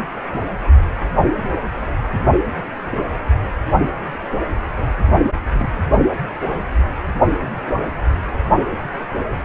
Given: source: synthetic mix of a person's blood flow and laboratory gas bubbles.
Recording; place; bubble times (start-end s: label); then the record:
Doppler ultrasound of blood flow; precordium
5.58-5.71 s: bubbles
From the record:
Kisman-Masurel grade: 121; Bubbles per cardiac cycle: 1 to 2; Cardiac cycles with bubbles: 10 to 50%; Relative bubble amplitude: barely perceptible (0.100 to 0.250); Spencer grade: 2 (many but less than half of the cardiac periods contain bubble signals, singularly or in groups); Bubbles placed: anywhere in the cardiac cycle